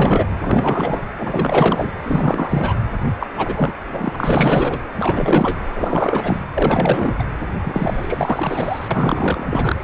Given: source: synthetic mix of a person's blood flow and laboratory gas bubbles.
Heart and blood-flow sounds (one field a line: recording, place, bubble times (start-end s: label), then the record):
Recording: Doppler ultrasound of blood flow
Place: precordium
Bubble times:
0.00-0.27 s: bubbles
0.36-1.08 s: bubbles
1.18-1.92 s: bubbles
2.02-2.86 s: bubbles
3.19-3.27 s: bubbles
3.37-3.73 s: bubbles
3.92-4.79 s: bubbles
4.99-5.60 s: bubbles
5.72-6.45 s: bubbles
6.54-7.12 s: bubbles
7.19-7.24 s: bubbles
7.64-9.81 s: bubbles
From the record:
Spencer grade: 4 (maximum detectable bubble signal sounding continuously throughout systole and diastole of every cardiac period, and overriding the amplitude of the normal cardiac signals)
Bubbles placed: anywhere in the cardiac cycle